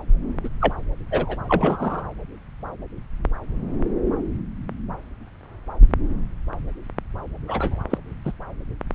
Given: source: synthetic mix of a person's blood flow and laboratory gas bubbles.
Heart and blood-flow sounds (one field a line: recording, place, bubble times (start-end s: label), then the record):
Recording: Doppler ultrasound of blood flow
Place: subclavian vein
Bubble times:
0.44-0.48 s: bubbles
0.60-0.73 s: bubbles
1.10-1.38 s: bubbles
1.49-2.02 s: bubbles
7.46-7.79 s: bubbles
7.89-7.97 s: bubbles
8.25-8.32 s: bubbles
From the record:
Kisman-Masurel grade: 122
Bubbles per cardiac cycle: 1 to 2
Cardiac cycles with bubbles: 10 to 50%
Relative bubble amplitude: moderate (0.250 to 0.450)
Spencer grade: 2 (many but less than half of the cardiac periods contain bubble signals, singularly or in groups)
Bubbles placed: anywhere in the cardiac cycle